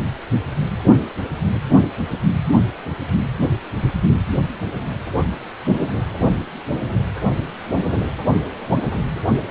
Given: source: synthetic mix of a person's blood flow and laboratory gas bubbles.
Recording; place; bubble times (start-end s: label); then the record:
Doppler ultrasound of blood flow; precordium
7.78-7.98 s: bubbles
From the record:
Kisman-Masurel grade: 121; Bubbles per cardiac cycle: 1 to 2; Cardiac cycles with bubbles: 10 to 50%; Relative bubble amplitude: barely perceptible (0.100 to 0.250); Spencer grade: 2 (many but less than half of the cardiac periods contain bubble signals, singularly or in groups); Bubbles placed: only in the low amplitude regions of the cardiac cycle